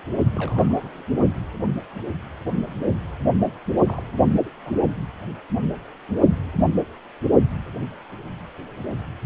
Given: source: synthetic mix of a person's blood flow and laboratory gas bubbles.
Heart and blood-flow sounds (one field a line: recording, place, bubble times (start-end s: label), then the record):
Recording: Doppler ultrasound of blood flow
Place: precordium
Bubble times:
0.35-1.02 s: bubbles
1.17-1.27 s: bubbles
3.87-4.03 s: bubbles
4.46-4.50 s: bubbles
4.65-4.77 s: bubbles
From the record:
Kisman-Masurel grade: 221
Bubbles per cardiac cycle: several, 3 to 8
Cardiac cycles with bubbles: 10 to 50%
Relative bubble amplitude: barely perceptible (0.100 to 0.250)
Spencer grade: 2 (many but less than half of the cardiac periods contain bubble signals, singularly or in groups)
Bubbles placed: only in the low amplitude regions of the cardiac cycle